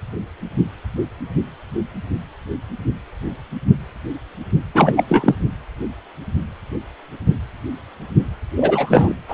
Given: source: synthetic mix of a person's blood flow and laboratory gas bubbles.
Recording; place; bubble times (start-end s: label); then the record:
Doppler ultrasound of blood flow; precordium
4.75-5.35 s: bubbles
8.56-9.13 s: bubbles
9.28-9.33 s: bubbles
From the record:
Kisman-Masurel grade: 223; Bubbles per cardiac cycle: several, 3 to 8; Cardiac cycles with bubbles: 10 to 50%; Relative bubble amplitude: loud (0.450 to 0.775); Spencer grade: 2 (many but less than half of the cardiac periods contain bubble signals, singularly or in groups); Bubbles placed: anywhere in the cardiac cycle